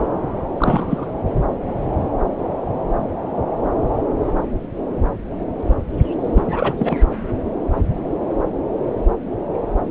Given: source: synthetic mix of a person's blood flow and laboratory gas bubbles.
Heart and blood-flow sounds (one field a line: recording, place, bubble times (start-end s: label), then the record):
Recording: Doppler ultrasound of blood flow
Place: subclavian vein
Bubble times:
0.53-1.11 s: bubbles
6.34-6.75 s: bubbles
6.79-6.98 s: bubbles
From the record:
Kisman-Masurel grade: 223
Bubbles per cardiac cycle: several, 3 to 8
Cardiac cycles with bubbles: 10 to 50%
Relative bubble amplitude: loud (0.450 to 0.775)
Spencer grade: 2 (many but less than half of the cardiac periods contain bubble signals, singularly or in groups)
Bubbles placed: anywhere in the cardiac cycle